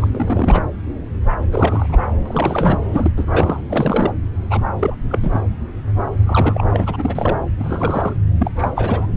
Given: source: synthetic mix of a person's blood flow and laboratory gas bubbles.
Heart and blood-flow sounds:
Doppler ultrasound of blood flow; subclavian vein
0.00-0.08 s: bubbles
0.15-0.62 s: bubbles
1.52-1.98 s: bubbles
2.25-2.79 s: bubbles
2.91-3.10 s: bubbles
3.17-3.61 s: bubbles
3.69-4.12 s: bubbles
4.50-4.62 s: bubbles
4.79-4.96 s: bubbles
5.09-5.19 s: bubbles
5.22-5.40 s: bubbles
6.26-6.67 s: bubbles
6.71-7.42 s: bubbles
7.57-8.15 s: bubbles
8.39-8.51 s: bubbles
8.57-8.69 s: bubbles
8.76-9.07 s: bubbles
From the record:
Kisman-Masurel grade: 332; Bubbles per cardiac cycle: rolling drumbeat, 9 or more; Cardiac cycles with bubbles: 50 to 99%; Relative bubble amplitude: moderate (0.250 to 0.450); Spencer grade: 3 (all of the cardiac periods contain showers or single bubble signals, but not dominating or overriding the cardiac motion signals); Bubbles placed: anywhere in the cardiac cycle

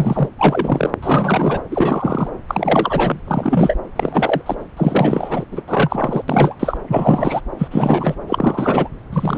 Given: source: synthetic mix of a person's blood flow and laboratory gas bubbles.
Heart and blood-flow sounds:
Doppler ultrasound of blood flow; subclavian vein
0.00-0.29 s: bubbles
0.39-0.90 s: bubbles
1.03-1.61 s: bubbles
1.71-2.29 s: bubbles
2.48-3.20 s: bubbles
3.27-3.75 s: bubbles
3.96-4.42 s: bubbles
4.46-4.56 s: bubbles
4.77-5.45 s: bubbles
5.52-5.62 s: bubbles
5.67-6.22 s: bubbles
6.28-6.56 s: bubbles
6.60-6.78 s: bubbles
6.88-7.41 s: bubbles
7.58-7.68 s: bubbles
7.71-8.15 s: bubbles
8.27-8.88 s: bubbles
9.12-9.38 s: bubbles
From the record:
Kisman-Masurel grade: 343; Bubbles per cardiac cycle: rolling drumbeat, 9 or more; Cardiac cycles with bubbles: 100%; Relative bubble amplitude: loud (0.450 to 0.775); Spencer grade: 3 (all of the cardiac periods contain showers or single bubble signals, but not dominating or overriding the cardiac motion signals); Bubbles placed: anywhere in the cardiac cycle

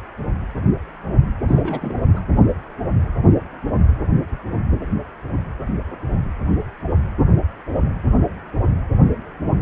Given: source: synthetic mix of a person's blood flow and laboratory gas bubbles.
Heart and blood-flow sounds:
Doppler ultrasound of blood flow; precordium
1.48-2.08 s: bubbles
2.14-2.21 s: bubbles
From the record:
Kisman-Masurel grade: 211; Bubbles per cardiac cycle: several, 3 to 8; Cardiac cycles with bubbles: 1 to 10%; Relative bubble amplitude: barely perceptible (0.100 to 0.250); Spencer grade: 1 (occasional bubble signal discernible with the cardiac motion signal, with majority of cardiac periods free of bubbles); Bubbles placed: anywhere in the cardiac cycle

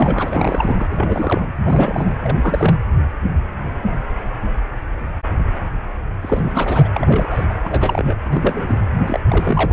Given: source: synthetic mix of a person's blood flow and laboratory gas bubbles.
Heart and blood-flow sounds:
Doppler ultrasound of blood flow; precordium
0.00-0.86 s: bubbles
0.89-1.46 s: bubbles
1.65-2.15 s: bubbles
2.21-2.75 s: bubbles
6.21-6.88 s: bubbles
6.94-7.45 s: bubbles
7.49-7.54 s: bubbles
7.63-8.14 s: bubbles
8.25-8.79 s: bubbles
9.07-9.20 s: bubbles
9.30-9.73 s: bubbles
From the record:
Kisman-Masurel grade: 332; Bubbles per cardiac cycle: rolling drumbeat, 9 or more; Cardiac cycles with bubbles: 50 to 99%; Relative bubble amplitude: moderate (0.250 to 0.450); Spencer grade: 3 (all of the cardiac periods contain showers or single bubble signals, but not dominating or overriding the cardiac motion signals); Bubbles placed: anywhere in the cardiac cycle

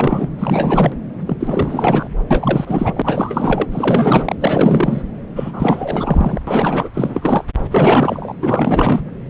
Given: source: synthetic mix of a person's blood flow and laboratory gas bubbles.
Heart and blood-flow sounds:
Doppler ultrasound of blood flow; subclavian vein
0.00-0.28 s: bubbles
0.39-0.92 s: bubbles
1.27-1.37 s: bubbles
1.40-2.08 s: bubbles
2.30-3.67 s: bubbles
3.71-4.36 s: bubbles
4.40-5.03 s: bubbles
5.36-6.41 s: bubbles
6.47-6.89 s: bubbles
6.94-7.43 s: bubbles
7.71-8.33 s: bubbles
8.41-9.02 s: bubbles
From the record:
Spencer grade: 4 (maximum detectable bubble signal sounding continuously throughout systole and diastole of every cardiac period, and overriding the amplitude of the normal cardiac signals); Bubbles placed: anywhere in the cardiac cycle

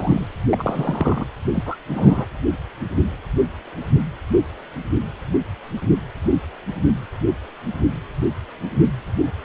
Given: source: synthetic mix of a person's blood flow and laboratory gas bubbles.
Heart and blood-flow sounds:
Doppler ultrasound of blood flow; precordium
0.00-0.26 s: bubbles
0.49-1.25 s: bubbles
1.54-1.77 s: bubbles
1.90-2.25 s: bubbles
From the record:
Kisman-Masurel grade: 222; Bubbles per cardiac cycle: several, 3 to 8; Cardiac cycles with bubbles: 10 to 50%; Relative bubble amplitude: moderate (0.250 to 0.450); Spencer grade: 2 (many but less than half of the cardiac periods contain bubble signals, singularly or in groups); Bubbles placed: anywhere in the cardiac cycle

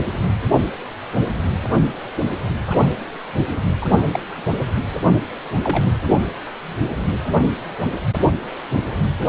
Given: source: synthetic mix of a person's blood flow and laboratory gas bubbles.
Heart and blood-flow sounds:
Doppler ultrasound of blood flow; precordium
0.00-0.05 s: bubbles
2.69-2.97 s: bubbles
3.82-3.87 s: bubbles
4.12-4.20 s: bubbles
5.63-5.91 s: bubbles
From the record:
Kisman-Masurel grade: 122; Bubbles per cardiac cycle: 1 to 2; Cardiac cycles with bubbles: 10 to 50%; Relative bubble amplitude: moderate (0.250 to 0.450); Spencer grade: 2 (many but less than half of the cardiac periods contain bubble signals, singularly or in groups); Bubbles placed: anywhere in the cardiac cycle

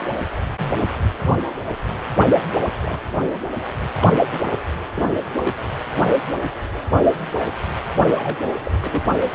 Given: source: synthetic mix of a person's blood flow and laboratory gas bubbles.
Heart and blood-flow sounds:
Doppler ultrasound of blood flow; precordium
0.00-0.07 s: bubbles
0.58-0.76 s: bubbles
2.81-2.99 s: bubbles
3.19-3.40 s: bubbles
4.00-4.12 s: bubbles
4.32-4.51 s: bubbles
4.96-5.09 s: bubbles
5.42-5.54 s: bubbles
8.16-8.36 s: bubbles
8.63-8.71 s: bubbles
8.81-9.04 s: bubbles
From the record:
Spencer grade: 2 (many but less than half of the cardiac periods contain bubble signals, singularly or in groups); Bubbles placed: anywhere in the cardiac cycle

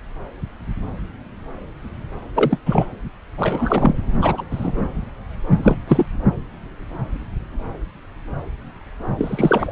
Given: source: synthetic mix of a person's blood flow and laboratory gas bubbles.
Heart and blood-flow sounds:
Doppler ultrasound of blood flow; subclavian vein
2.35-2.60 s: bubbles
2.66-2.87 s: bubbles
3.38-3.97 s: bubbles
4.17-4.45 s: bubbles
4.50-4.83 s: bubbles
5.57-5.76 s: bubbles
5.88-6.06 s: bubbles
9.17-9.72 s: bubbles
From the record:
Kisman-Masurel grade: 223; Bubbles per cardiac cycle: several, 3 to 8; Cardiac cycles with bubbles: 10 to 50%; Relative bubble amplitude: loud (0.450 to 0.775); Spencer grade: 2 (many but less than half of the cardiac periods contain bubble signals, singularly or in groups); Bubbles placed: anywhere in the cardiac cycle

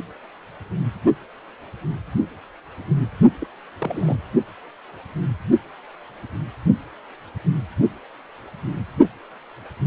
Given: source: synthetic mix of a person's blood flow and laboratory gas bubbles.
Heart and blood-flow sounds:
Doppler ultrasound of blood flow; precordium
3.41-3.47 s: bubbles
3.79-4.16 s: bubbles
From the record:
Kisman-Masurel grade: 211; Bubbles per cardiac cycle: several, 3 to 8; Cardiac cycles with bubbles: 1 to 10%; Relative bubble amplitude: barely perceptible (0.100 to 0.250); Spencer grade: 1 (occasional bubble signal discernible with the cardiac motion signal, with majority of cardiac periods free of bubbles); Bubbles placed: only in the low amplitude regions of the cardiac cycle

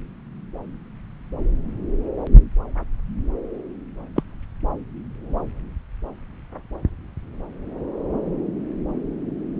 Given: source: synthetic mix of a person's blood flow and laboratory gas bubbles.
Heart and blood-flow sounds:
Doppler ultrasound of blood flow; subclavian vein
4.16-4.23 s: bubbles
From the record:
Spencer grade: 1 (occasional bubble signal discernible with the cardiac motion signal, with majority of cardiac periods free of bubbles); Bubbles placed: anywhere in the cardiac cycle

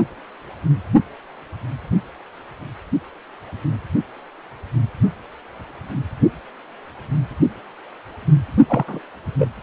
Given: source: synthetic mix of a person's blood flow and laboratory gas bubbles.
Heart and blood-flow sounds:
Doppler ultrasound of blood flow; precordium
8.68-8.84 s: bubbles
8.88-9.00 s: bubbles
9.38-9.48 s: bubbles
From the record:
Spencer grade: 1 (occasional bubble signal discernible with the cardiac motion signal, with majority of cardiac periods free of bubbles); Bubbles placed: only in the low amplitude regions of the cardiac cycle

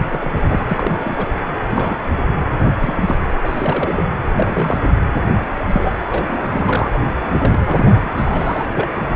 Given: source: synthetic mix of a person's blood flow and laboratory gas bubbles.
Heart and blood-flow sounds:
Doppler ultrasound of blood flow; precordium
0.09-0.32 s: bubbles
0.34-0.64 s: bubbles
0.69-1.28 s: bubbles
1.71-2.04 s: bubbles
2.58-2.72 s: bubbles
2.80-3.04 s: bubbles
3.08-3.16 s: bubbles
3.43-4.10 s: bubbles
4.37-4.95 s: bubbles
5.68-6.05 s: bubbles
6.08-6.46 s: bubbles
6.50-6.99 s: bubbles
7.32-8.09 s: bubbles
8.16-8.72 s: bubbles
8.75-8.88 s: bubbles
From the record:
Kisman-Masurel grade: 242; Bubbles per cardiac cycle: several, 3 to 8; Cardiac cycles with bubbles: 100%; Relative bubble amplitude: moderate (0.250 to 0.450); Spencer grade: 3 (all of the cardiac periods contain showers or single bubble signals, but not dominating or overriding the cardiac motion signals); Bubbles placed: anywhere in the cardiac cycle

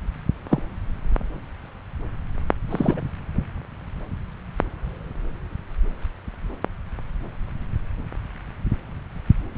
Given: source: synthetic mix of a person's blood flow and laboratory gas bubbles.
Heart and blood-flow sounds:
Doppler ultrasound of blood flow; subclavian vein
0.49-0.62 s: bubbles
2.70-3.00 s: bubbles
From the record:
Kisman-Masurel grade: 122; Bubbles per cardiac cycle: 1 to 2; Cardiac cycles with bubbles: 10 to 50%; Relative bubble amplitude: moderate (0.250 to 0.450); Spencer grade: 2 (many but less than half of the cardiac periods contain bubble signals, singularly or in groups); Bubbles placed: anywhere in the cardiac cycle

